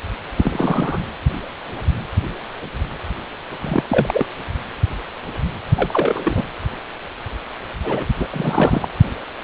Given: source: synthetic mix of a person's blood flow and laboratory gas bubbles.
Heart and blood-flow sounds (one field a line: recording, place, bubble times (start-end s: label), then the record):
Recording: Doppler ultrasound of blood flow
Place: precordium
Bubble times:
0.36-0.98 s: bubbles
3.61-3.83 s: bubbles
3.88-4.26 s: bubbles
5.76-6.49 s: bubbles
7.84-8.04 s: bubbles
8.19-8.28 s: bubbles
8.31-8.88 s: bubbles
From the record:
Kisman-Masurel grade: 222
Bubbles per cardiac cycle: several, 3 to 8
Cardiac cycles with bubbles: 10 to 50%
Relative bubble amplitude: moderate (0.250 to 0.450)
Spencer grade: 2 (many but less than half of the cardiac periods contain bubble signals, singularly or in groups)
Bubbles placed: anywhere in the cardiac cycle